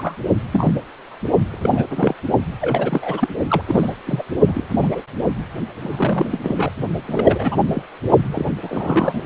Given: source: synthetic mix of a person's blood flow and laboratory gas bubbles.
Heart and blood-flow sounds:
Doppler ultrasound of blood flow; precordium
0.00-0.16 s: bubbles
0.52-0.74 s: bubbles
1.50-1.84 s: bubbles
1.90-2.15 s: bubbles
2.61-3.29 s: bubbles
3.48-3.61 s: bubbles
3.67-3.94 s: bubbles
4.05-4.23 s: bubbles
4.47-4.64 s: bubbles
4.71-5.01 s: bubbles
5.82-6.40 s: bubbles
6.43-6.70 s: bubbles
7.07-7.56 s: bubbles
7.74-7.83 s: bubbles
8.32-8.51 s: bubbles
8.61-9.24 s: bubbles
From the record:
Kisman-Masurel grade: 242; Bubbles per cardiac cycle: several, 3 to 8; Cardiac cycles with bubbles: 100%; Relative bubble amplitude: moderate (0.250 to 0.450); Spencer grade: 3 (all of the cardiac periods contain showers or single bubble signals, but not dominating or overriding the cardiac motion signals); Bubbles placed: only in the low amplitude regions of the cardiac cycle

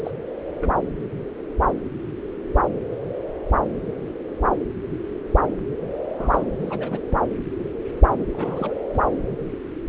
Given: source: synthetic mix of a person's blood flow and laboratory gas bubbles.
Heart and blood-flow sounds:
Doppler ultrasound of blood flow; subclavian vein
0.00-0.11 s: bubbles
0.60-0.73 s: bubbles
6.18-6.43 s: bubbles
6.61-7.00 s: bubbles
7.10-7.17 s: bubbles
8.09-8.23 s: bubbles
8.28-8.73 s: bubbles
8.94-8.99 s: bubbles
From the record:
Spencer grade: 2 (many but less than half of the cardiac periods contain bubble signals, singularly or in groups); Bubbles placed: anywhere in the cardiac cycle

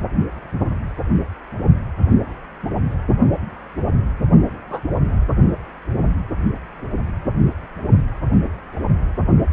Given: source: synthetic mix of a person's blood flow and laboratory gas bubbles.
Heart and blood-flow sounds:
Doppler ultrasound of blood flow; precordium
4.70-4.82 s: bubbles
From the record:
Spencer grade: 1 (occasional bubble signal discernible with the cardiac motion signal, with majority of cardiac periods free of bubbles); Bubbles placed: only in the low amplitude regions of the cardiac cycle

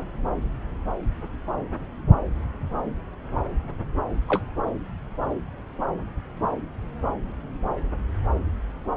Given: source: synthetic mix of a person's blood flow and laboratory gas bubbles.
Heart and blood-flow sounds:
Doppler ultrasound of blood flow; subclavian vein
4.28-4.42 s: bubbles
From the record:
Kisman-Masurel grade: 112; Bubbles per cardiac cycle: 1 to 2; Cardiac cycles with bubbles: 1 to 10%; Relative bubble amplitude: moderate (0.250 to 0.450); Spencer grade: 1 (occasional bubble signal discernible with the cardiac motion signal, with majority of cardiac periods free of bubbles); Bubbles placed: anywhere in the cardiac cycle

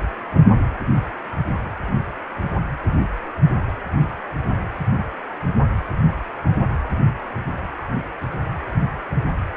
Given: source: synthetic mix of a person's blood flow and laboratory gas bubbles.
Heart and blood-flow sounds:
Doppler ultrasound of blood flow; precordium
no bubbles
From the record:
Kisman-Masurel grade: 000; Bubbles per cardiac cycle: 0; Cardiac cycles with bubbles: 0%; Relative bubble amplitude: no bubbles discernible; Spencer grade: 0 (complete lack of bubble signals)

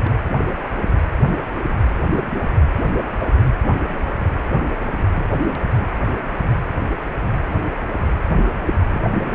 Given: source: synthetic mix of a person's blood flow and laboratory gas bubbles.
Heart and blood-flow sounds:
Doppler ultrasound of blood flow; precordium
0.02-0.12 s: bubbles
2.97-3.04 s: bubbles
8.94-9.01 s: bubbles
From the record:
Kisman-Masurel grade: 121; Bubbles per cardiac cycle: 1 to 2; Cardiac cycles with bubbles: 10 to 50%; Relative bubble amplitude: barely perceptible (0.100 to 0.250); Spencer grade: 2 (many but less than half of the cardiac periods contain bubble signals, singularly or in groups); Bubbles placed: anywhere in the cardiac cycle

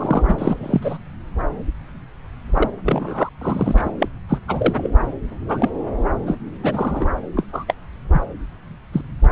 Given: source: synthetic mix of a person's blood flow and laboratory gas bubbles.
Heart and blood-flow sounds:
Doppler ultrasound of blood flow; subclavian vein
0.00-0.98 s: bubbles
2.53-2.70 s: bubbles
2.85-3.29 s: bubbles
3.41-3.91 s: bubbles
4.00-4.08 s: bubbles
4.29-4.38 s: bubbles
4.48-4.73 s: bubbles
4.77-4.90 s: bubbles
5.48-5.70 s: bubbles
6.25-6.37 s: bubbles
6.63-7.06 s: bubbles
7.36-7.46 s: bubbles
7.52-7.65 s: bubbles
7.67-7.74 s: bubbles
8.12-8.21 s: bubbles
8.93-9.01 s: bubbles
From the record:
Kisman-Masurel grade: 242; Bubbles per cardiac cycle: several, 3 to 8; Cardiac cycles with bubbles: 100%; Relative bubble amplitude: moderate (0.250 to 0.450); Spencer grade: 3 (all of the cardiac periods contain showers or single bubble signals, but not dominating or overriding the cardiac motion signals); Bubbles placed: anywhere in the cardiac cycle

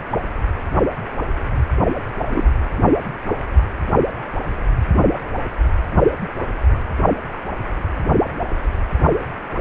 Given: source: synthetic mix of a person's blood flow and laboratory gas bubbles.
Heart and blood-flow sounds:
Doppler ultrasound of blood flow; precordium
2.31-2.47 s: bubbles
From the record:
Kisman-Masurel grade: 113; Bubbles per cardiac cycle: 1 to 2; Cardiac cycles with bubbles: 1 to 10%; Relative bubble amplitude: loud (0.450 to 0.775); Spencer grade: 1 (occasional bubble signal discernible with the cardiac motion signal, with majority of cardiac periods free of bubbles); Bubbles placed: anywhere in the cardiac cycle

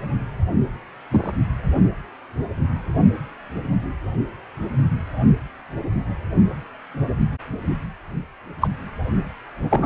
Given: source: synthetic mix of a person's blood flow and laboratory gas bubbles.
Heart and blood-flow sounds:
Doppler ultrasound of blood flow; precordium
1.11-1.32 s: bubbles
8.61-8.67 s: bubbles
9.71-9.86 s: bubbles
From the record:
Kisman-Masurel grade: 123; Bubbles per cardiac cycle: 1 to 2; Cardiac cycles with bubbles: 10 to 50%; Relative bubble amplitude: loud (0.450 to 0.775); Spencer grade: 2 (many but less than half of the cardiac periods contain bubble signals, singularly or in groups); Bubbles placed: only in the low amplitude regions of the cardiac cycle

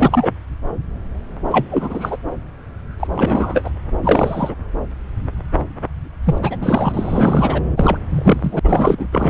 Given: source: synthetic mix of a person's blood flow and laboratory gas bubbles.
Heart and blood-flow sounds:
Doppler ultrasound of blood flow; subclavian vein
0.00-0.32 s: bubbles
1.49-1.65 s: bubbles
1.70-2.17 s: bubbles
3.00-3.08 s: bubbles
3.15-3.71 s: bubbles
4.03-4.55 s: bubbles
6.24-6.38 s: bubbles
6.42-6.56 s: bubbles
6.61-7.63 s: bubbles
7.76-7.98 s: bubbles
8.09-8.59 s: bubbles
8.63-9.08 s: bubbles
9.11-9.30 s: bubbles
From the record:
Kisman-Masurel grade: 333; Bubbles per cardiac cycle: rolling drumbeat, 9 or more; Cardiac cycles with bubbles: 50 to 99%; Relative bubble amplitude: loud (0.450 to 0.775); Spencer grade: 3 (all of the cardiac periods contain showers or single bubble signals, but not dominating or overriding the cardiac motion signals); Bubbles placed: anywhere in the cardiac cycle

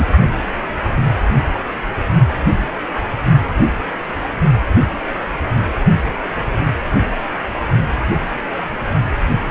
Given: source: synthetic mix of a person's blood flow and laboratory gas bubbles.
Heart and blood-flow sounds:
Doppler ultrasound of blood flow; precordium
0.00-0.05 s: bubbles
From the record:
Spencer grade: 1 (occasional bubble signal discernible with the cardiac motion signal, with majority of cardiac periods free of bubbles); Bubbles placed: only in the low amplitude regions of the cardiac cycle

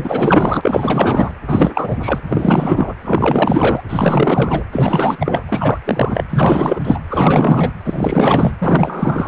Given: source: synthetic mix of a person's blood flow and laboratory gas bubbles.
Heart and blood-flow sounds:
Doppler ultrasound of blood flow; precordium
0.00-1.31 s: bubbles
1.47-1.96 s: bubbles
2.00-2.21 s: bubbles
2.28-2.94 s: bubbles
3.04-3.81 s: bubbles
3.88-4.63 s: bubbles
4.72-5.17 s: bubbles
5.20-5.44 s: bubbles
5.49-5.79 s: bubbles
5.85-6.24 s: bubbles
6.29-6.99 s: bubbles
7.10-7.72 s: bubbles
7.84-8.53 s: bubbles
8.61-9.28 s: bubbles
From the record:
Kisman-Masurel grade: 444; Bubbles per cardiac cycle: continuous sound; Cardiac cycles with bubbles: 100%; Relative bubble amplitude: maximal (0.775 to 0.999); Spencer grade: 4 (maximum detectable bubble signal sounding continuously throughout systole and diastole of every cardiac period, and overriding the amplitude of the normal cardiac signals); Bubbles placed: anywhere in the cardiac cycle

